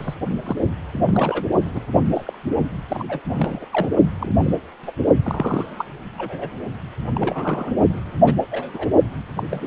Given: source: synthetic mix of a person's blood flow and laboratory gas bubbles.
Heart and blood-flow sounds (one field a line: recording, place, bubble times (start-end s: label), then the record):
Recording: Doppler ultrasound of blood flow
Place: precordium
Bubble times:
0.00-0.15 s: bubbles
0.44-0.55 s: bubbles
0.93-1.45 s: bubbles
1.66-1.80 s: bubbles
1.93-2.01 s: bubbles
2.14-2.38 s: bubbles
2.88-3.05 s: bubbles
3.08-3.21 s: bubbles
3.27-3.66 s: bubbles
3.72-3.89 s: bubbles
4.19-4.35 s: bubbles
4.40-4.54 s: bubbles
4.83-4.91 s: bubbles
5.24-5.86 s: bubbles
6.17-6.50 s: bubbles
7.16-7.73 s: bubbles
7.88-8.03 s: bubbles
8.26-8.33 s: bubbles
8.51-8.88 s: bubbles
9.36-9.43 s: bubbles
9.50-9.67 s: bubbles
From the record:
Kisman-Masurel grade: 242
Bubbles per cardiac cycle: several, 3 to 8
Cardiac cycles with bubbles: 100%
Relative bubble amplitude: moderate (0.250 to 0.450)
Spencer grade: 3 (all of the cardiac periods contain showers or single bubble signals, but not dominating or overriding the cardiac motion signals)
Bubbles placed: only in the low amplitude regions of the cardiac cycle